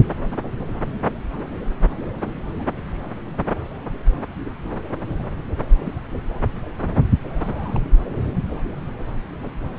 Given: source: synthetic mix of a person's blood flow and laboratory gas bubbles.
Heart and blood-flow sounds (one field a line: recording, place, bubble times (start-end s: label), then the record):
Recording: Doppler ultrasound of blood flow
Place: subclavian vein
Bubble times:
7.28-7.80 s: bubbles
From the record:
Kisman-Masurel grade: 211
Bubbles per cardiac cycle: several, 3 to 8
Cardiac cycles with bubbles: 1 to 10%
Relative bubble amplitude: barely perceptible (0.100 to 0.250)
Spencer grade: 1 (occasional bubble signal discernible with the cardiac motion signal, with majority of cardiac periods free of bubbles)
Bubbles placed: anywhere in the cardiac cycle